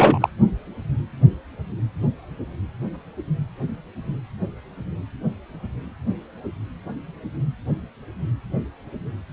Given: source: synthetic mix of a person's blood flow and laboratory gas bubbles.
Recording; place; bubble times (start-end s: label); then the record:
Doppler ultrasound of blood flow; precordium
0.00-0.29 s: bubbles
From the record:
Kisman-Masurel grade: 223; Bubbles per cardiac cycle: several, 3 to 8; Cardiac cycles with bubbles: 10 to 50%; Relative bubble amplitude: loud (0.450 to 0.775); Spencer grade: 2 (many but less than half of the cardiac periods contain bubble signals, singularly or in groups); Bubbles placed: only in the low amplitude regions of the cardiac cycle